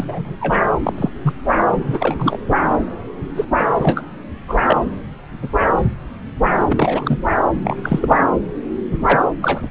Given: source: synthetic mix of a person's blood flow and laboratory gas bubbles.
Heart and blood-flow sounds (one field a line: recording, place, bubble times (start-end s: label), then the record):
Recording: Doppler ultrasound of blood flow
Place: subclavian vein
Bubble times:
0.00-0.36 s: bubbles
0.40-0.63 s: bubbles
0.83-0.93 s: bubbles
0.97-1.09 s: bubbles
1.23-1.33 s: bubbles
1.68-2.38 s: bubbles
3.35-3.44 s: bubbles
3.56-3.65 s: bubbles
3.74-4.06 s: bubbles
4.48-4.59 s: bubbles
4.65-4.77 s: bubbles
5.42-5.49 s: bubbles
6.69-7.18 s: bubbles
7.64-7.77 s: bubbles
7.83-8.21 s: bubbles
8.91-8.98 s: bubbles
9.05-9.21 s: bubbles
9.42-9.69 s: bubbles
From the record:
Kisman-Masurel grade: 242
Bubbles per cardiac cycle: several, 3 to 8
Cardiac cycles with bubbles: 100%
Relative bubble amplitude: moderate (0.250 to 0.450)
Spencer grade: 3 (all of the cardiac periods contain showers or single bubble signals, but not dominating or overriding the cardiac motion signals)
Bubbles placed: anywhere in the cardiac cycle